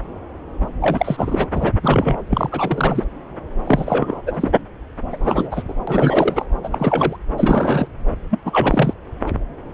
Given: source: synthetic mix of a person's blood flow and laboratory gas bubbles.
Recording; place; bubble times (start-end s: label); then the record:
Doppler ultrasound of blood flow; subclavian vein
0.81-1.47 s: bubbles
1.54-1.72 s: bubbles
1.83-2.17 s: bubbles
2.30-3.04 s: bubbles
3.66-4.22 s: bubbles
4.26-4.51 s: bubbles
5.12-5.63 s: bubbles
5.67-5.74 s: bubbles
5.87-6.45 s: bubbles
6.63-7.17 s: bubbles
7.37-7.88 s: bubbles
8.30-8.38 s: bubbles
8.45-8.93 s: bubbles
From the record:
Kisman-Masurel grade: 333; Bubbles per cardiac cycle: rolling drumbeat, 9 or more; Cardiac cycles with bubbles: 50 to 99%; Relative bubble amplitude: loud (0.450 to 0.775); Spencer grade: 3 (all of the cardiac periods contain showers or single bubble signals, but not dominating or overriding the cardiac motion signals); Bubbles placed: anywhere in the cardiac cycle